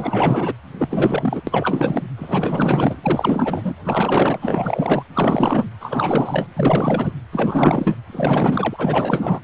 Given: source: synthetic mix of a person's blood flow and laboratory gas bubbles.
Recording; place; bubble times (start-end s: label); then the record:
Doppler ultrasound of blood flow; precordium
0.00-0.54 s: bubbles
0.79-1.42 s: bubbles
1.47-2.02 s: bubbles
2.17-2.96 s: bubbles
3.02-3.75 s: bubbles
3.84-5.03 s: bubbles
5.13-5.65 s: bubbles
5.80-6.46 s: bubbles
6.55-7.12 s: bubbles
7.32-7.94 s: bubbles
8.12-9.40 s: bubbles
From the record:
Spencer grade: 4 (maximum detectable bubble signal sounding continuously throughout systole and diastole of every cardiac period, and overriding the amplitude of the normal cardiac signals); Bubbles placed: anywhere in the cardiac cycle